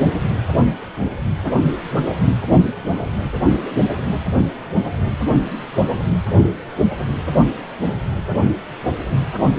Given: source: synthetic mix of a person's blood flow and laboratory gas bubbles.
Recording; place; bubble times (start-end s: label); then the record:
Doppler ultrasound of blood flow; precordium
no bubbles
From the record:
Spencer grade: 0 (complete lack of bubble signals)